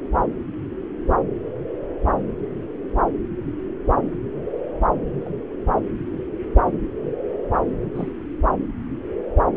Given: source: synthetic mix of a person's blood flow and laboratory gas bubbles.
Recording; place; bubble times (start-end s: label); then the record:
Doppler ultrasound of blood flow; subclavian vein
5.25-5.28 s: bubbles
5.63-5.80 s: bubbles
7.95-8.09 s: bubbles
From the record:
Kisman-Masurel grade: 121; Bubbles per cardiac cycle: 1 to 2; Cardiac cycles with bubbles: 10 to 50%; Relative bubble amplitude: barely perceptible (0.100 to 0.250); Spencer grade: 2 (many but less than half of the cardiac periods contain bubble signals, singularly or in groups); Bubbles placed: anywhere in the cardiac cycle